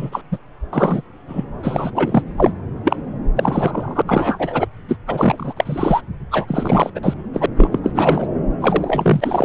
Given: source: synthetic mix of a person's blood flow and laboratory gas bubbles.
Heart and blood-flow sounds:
Doppler ultrasound of blood flow; subclavian vein
0.00-0.22 s: bubbles
0.31-0.39 s: bubbles
0.73-1.02 s: bubbles
1.28-1.44 s: bubbles
1.63-1.91 s: bubbles
1.95-2.22 s: bubbles
2.37-2.52 s: bubbles
2.84-2.96 s: bubbles
3.35-4.02 s: bubbles
4.07-4.67 s: bubbles
4.88-4.96 s: bubbles
5.07-5.54 s: bubbles
5.56-6.01 s: bubbles
6.31-6.46 s: bubbles
6.48-6.90 s: bubbles
6.95-7.00 s: bubbles
7.02-7.14 s: bubbles
7.33-7.46 s: bubbles
7.57-7.79 s: bubbles
7.83-8.27 s: bubbles
8.60-9.45 s: bubbles
From the record:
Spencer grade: 3 (all of the cardiac periods contain showers or single bubble signals, but not dominating or overriding the cardiac motion signals); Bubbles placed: anywhere in the cardiac cycle

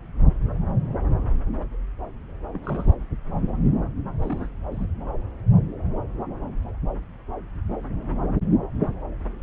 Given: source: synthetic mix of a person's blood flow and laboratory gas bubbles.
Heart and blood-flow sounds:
Doppler ultrasound of blood flow; subclavian vein
2.53-2.59 s: bubbles
2.62-2.94 s: bubbles
4.16-4.48 s: bubbles
4.71-4.88 s: bubbles
From the record:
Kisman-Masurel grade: 221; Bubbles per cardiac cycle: several, 3 to 8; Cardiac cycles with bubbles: 10 to 50%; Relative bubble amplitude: barely perceptible (0.100 to 0.250); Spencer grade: 2 (many but less than half of the cardiac periods contain bubble signals, singularly or in groups); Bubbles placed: anywhere in the cardiac cycle

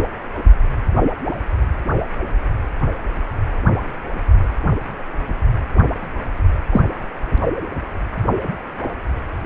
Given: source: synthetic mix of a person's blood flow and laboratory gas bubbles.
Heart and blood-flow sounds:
Doppler ultrasound of blood flow; precordium
6.73-6.84 s: bubbles
From the record:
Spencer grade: 1 (occasional bubble signal discernible with the cardiac motion signal, with majority of cardiac periods free of bubbles); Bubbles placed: anywhere in the cardiac cycle

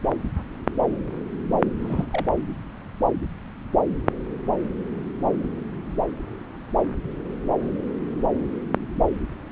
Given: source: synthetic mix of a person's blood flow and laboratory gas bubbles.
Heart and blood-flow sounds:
Doppler ultrasound of blood flow; subclavian vein
1.82-2.07 s: bubbles
2.11-2.25 s: bubbles
From the record:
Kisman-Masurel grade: 211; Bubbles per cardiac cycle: several, 3 to 8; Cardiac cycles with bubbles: 1 to 10%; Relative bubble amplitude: barely perceptible (0.100 to 0.250); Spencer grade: 1 (occasional bubble signal discernible with the cardiac motion signal, with majority of cardiac periods free of bubbles); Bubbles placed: anywhere in the cardiac cycle

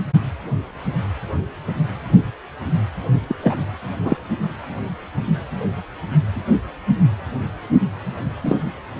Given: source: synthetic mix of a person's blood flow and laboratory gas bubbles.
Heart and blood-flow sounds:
Doppler ultrasound of blood flow; precordium
3.29-3.35 s: bubbles
3.41-3.67 s: bubbles
4.01-4.17 s: bubbles
8.43-8.56 s: bubbles
From the record:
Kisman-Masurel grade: 222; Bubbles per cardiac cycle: several, 3 to 8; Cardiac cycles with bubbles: 10 to 50%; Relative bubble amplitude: moderate (0.250 to 0.450); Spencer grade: 2 (many but less than half of the cardiac periods contain bubble signals, singularly or in groups); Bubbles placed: anywhere in the cardiac cycle

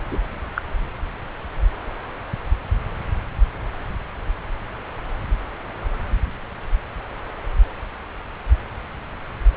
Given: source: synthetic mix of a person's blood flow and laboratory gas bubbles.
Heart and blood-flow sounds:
Doppler ultrasound of blood flow; subclavian vein
0.11-0.18 s: bubbles
0.55-0.61 s: bubbles
From the record:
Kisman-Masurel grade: 112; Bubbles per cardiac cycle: 1 to 2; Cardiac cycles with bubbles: 1 to 10%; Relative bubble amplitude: moderate (0.250 to 0.450); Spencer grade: 1 (occasional bubble signal discernible with the cardiac motion signal, with majority of cardiac periods free of bubbles); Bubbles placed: anywhere in the cardiac cycle

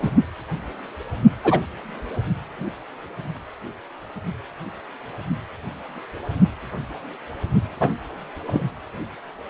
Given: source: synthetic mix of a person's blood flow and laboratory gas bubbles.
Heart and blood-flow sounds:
Doppler ultrasound of blood flow; precordium
0.02-0.10 s: bubbles
1.43-1.59 s: bubbles
7.80-7.90 s: bubbles
8.47-8.63 s: bubbles
From the record:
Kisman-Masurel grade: 123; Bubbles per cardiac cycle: 1 to 2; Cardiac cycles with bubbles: 10 to 50%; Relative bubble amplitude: loud (0.450 to 0.775); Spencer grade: 2 (many but less than half of the cardiac periods contain bubble signals, singularly or in groups); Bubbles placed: only in the low amplitude regions of the cardiac cycle

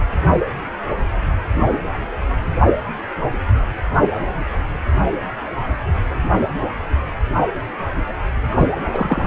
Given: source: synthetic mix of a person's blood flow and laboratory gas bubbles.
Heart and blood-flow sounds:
Doppler ultrasound of blood flow; precordium
8.51-8.69 s: bubbles
8.93-9.27 s: bubbles
From the record:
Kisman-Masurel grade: 212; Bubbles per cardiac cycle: several, 3 to 8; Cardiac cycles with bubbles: 1 to 10%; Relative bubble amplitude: moderate (0.250 to 0.450); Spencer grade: 1 (occasional bubble signal discernible with the cardiac motion signal, with majority of cardiac periods free of bubbles); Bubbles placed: anywhere in the cardiac cycle

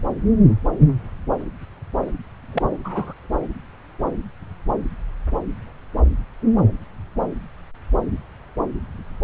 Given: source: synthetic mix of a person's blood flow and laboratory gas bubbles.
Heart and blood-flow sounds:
Doppler ultrasound of blood flow; subclavian vein
2.52-2.62 s: bubbles
2.84-3.13 s: bubbles
From the record:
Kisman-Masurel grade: 112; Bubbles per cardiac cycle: 1 to 2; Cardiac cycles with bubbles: 1 to 10%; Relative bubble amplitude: moderate (0.250 to 0.450); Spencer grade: 1 (occasional bubble signal discernible with the cardiac motion signal, with majority of cardiac periods free of bubbles); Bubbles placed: anywhere in the cardiac cycle

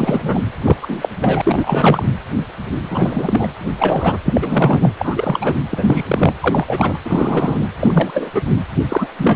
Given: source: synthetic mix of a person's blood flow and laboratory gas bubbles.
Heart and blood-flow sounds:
Doppler ultrasound of blood flow; precordium
0.00-0.42 s: bubbles
0.64-0.77 s: bubbles
0.82-1.08 s: bubbles
1.21-1.42 s: bubbles
1.45-2.03 s: bubbles
2.90-3.47 s: bubbles
3.79-4.18 s: bubbles
4.25-4.93 s: bubbles
4.99-5.54 s: bubbles
5.70-6.04 s: bubbles
6.08-6.33 s: bubbles
6.41-7.00 s: bubbles
7.03-7.67 s: bubbles
7.80-8.42 s: bubbles
8.88-9.07 s: bubbles
9.18-9.36 s: bubbles
From the record:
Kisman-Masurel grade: 333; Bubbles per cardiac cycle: rolling drumbeat, 9 or more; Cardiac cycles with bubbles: 50 to 99%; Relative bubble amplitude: loud (0.450 to 0.775); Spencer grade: 3 (all of the cardiac periods contain showers or single bubble signals, but not dominating or overriding the cardiac motion signals); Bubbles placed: anywhere in the cardiac cycle

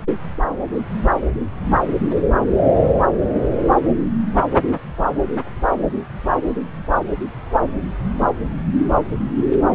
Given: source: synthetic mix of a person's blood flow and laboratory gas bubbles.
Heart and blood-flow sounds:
Doppler ultrasound of blood flow; subclavian vein
no bubbles
From the record:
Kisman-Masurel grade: 000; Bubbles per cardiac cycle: 0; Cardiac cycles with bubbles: 0%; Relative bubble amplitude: no bubbles discernible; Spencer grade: 0 (complete lack of bubble signals)

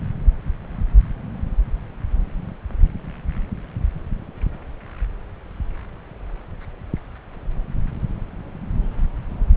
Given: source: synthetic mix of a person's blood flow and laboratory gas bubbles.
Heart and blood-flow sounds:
Doppler ultrasound of blood flow; subclavian vein
no bubbles
From the record:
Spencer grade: 0 (complete lack of bubble signals)

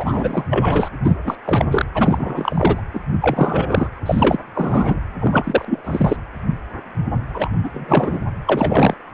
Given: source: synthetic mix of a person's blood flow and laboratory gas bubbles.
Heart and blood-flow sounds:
Doppler ultrasound of blood flow; precordium
0.00-0.46 s: bubbles
0.49-0.89 s: bubbles
1.01-1.15 s: bubbles
1.25-1.37 s: bubbles
1.44-1.65 s: bubbles
1.71-1.85 s: bubbles
1.94-2.83 s: bubbles
2.94-3.00 s: bubbles
3.21-3.88 s: bubbles
4.05-4.38 s: bubbles
4.54-5.01 s: bubbles
5.20-5.81 s: bubbles
5.85-6.17 s: bubbles
7.34-7.49 s: bubbles
7.63-7.70 s: bubbles
7.73-8.25 s: bubbles
8.46-8.94 s: bubbles
From the record:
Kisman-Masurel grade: 333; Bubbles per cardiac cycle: rolling drumbeat, 9 or more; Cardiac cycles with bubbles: 50 to 99%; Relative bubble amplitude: loud (0.450 to 0.775); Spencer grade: 3 (all of the cardiac periods contain showers or single bubble signals, but not dominating or overriding the cardiac motion signals); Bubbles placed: anywhere in the cardiac cycle

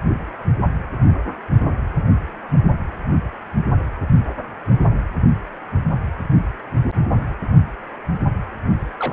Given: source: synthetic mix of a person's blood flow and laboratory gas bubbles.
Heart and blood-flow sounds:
Doppler ultrasound of blood flow; precordium
8.98-9.13 s: bubbles
From the record:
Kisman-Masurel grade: 221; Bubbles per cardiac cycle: several, 3 to 8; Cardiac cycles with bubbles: 10 to 50%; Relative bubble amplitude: barely perceptible (0.100 to 0.250); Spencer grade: 2 (many but less than half of the cardiac periods contain bubble signals, singularly or in groups); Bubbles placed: only in the low amplitude regions of the cardiac cycle

